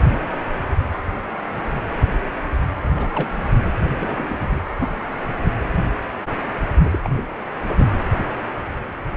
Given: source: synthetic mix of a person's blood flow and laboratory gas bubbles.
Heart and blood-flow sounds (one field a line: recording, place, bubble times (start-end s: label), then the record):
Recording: Doppler ultrasound of blood flow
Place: precordium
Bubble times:
2.83-3.07 s: bubbles
3.15-3.31 s: bubbles
4.00-4.59 s: bubbles
4.80-4.88 s: bubbles
6.83-6.99 s: bubbles
7.04-7.26 s: bubbles
7.66-7.89 s: bubbles
From the record:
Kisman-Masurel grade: 221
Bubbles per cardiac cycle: several, 3 to 8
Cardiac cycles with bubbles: 10 to 50%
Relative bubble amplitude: barely perceptible (0.100 to 0.250)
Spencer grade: 2 (many but less than half of the cardiac periods contain bubble signals, singularly or in groups)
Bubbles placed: anywhere in the cardiac cycle